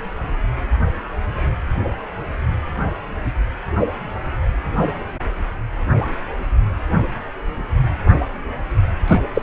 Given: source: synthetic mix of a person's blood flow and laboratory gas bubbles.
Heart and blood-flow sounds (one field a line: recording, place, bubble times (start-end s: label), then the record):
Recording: Doppler ultrasound of blood flow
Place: precordium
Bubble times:
9.07-9.20 s: bubbles
9.34-9.41 s: bubbles
From the record:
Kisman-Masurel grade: 213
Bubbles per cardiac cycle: several, 3 to 8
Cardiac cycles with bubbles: 1 to 10%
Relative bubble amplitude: loud (0.450 to 0.775)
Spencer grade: 1 (occasional bubble signal discernible with the cardiac motion signal, with majority of cardiac periods free of bubbles)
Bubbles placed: anywhere in the cardiac cycle